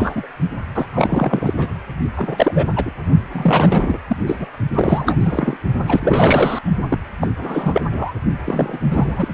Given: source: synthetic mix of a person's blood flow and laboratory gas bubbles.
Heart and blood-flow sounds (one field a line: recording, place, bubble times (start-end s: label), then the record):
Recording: Doppler ultrasound of blood flow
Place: precordium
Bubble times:
0.00-0.27 s: bubbles
0.75-0.85 s: bubbles
0.91-1.53 s: bubbles
1.56-1.68 s: bubbles
2.17-2.67 s: bubbles
2.75-2.92 s: bubbles
3.31-3.98 s: bubbles
4.08-4.17 s: bubbles
4.26-4.46 s: bubbles
4.74-5.17 s: bubbles
5.20-5.57 s: bubbles
5.87-6.59 s: bubbles
6.89-6.99 s: bubbles
7.21-7.28 s: bubbles
7.37-7.82 s: bubbles
7.93-8.13 s: bubbles
8.45-8.79 s: bubbles
8.90-9.28 s: bubbles
From the record:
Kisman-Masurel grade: 343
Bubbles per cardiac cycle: rolling drumbeat, 9 or more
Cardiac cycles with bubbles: 100%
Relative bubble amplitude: loud (0.450 to 0.775)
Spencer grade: 3 (all of the cardiac periods contain showers or single bubble signals, but not dominating or overriding the cardiac motion signals)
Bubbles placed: only in the low amplitude regions of the cardiac cycle